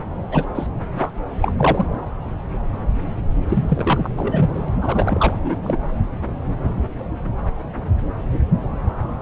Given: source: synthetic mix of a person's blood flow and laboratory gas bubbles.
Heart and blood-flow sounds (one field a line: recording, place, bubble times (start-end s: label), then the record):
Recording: Doppler ultrasound of blood flow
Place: subclavian vein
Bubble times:
0.31-0.45 s: bubbles
0.55-0.67 s: bubbles
0.98-1.11 s: bubbles
1.42-1.52 s: bubbles
1.58-1.85 s: bubbles
3.48-4.10 s: bubbles
4.17-4.50 s: bubbles
4.53-4.68 s: bubbles
4.81-5.56 s: bubbles
5.62-5.90 s: bubbles
From the record:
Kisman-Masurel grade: 332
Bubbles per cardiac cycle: rolling drumbeat, 9 or more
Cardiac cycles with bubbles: 50 to 99%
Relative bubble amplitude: moderate (0.250 to 0.450)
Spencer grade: 3 (all of the cardiac periods contain showers or single bubble signals, but not dominating or overriding the cardiac motion signals)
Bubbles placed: anywhere in the cardiac cycle